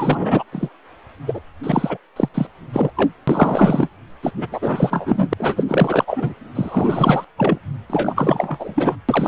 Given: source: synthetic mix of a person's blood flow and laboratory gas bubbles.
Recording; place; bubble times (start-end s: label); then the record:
Doppler ultrasound of blood flow; precordium
0.00-0.43 s: bubbles
0.52-0.69 s: bubbles
1.27-1.41 s: bubbles
1.63-1.97 s: bubbles
2.16-2.29 s: bubbles
2.34-2.47 s: bubbles
2.73-2.90 s: bubbles
2.96-3.11 s: bubbles
3.27-3.88 s: bubbles
4.22-4.31 s: bubbles
4.37-4.46 s: bubbles
4.51-5.33 s: bubbles
5.38-5.63 s: bubbles
5.67-6.04 s: bubbles
6.07-6.34 s: bubbles
6.54-7.25 s: bubbles
7.37-7.58 s: bubbles
7.89-8.96 s: bubbles
9.08-9.28 s: bubbles
From the record:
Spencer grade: 4 (maximum detectable bubble signal sounding continuously throughout systole and diastole of every cardiac period, and overriding the amplitude of the normal cardiac signals); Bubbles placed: anywhere in the cardiac cycle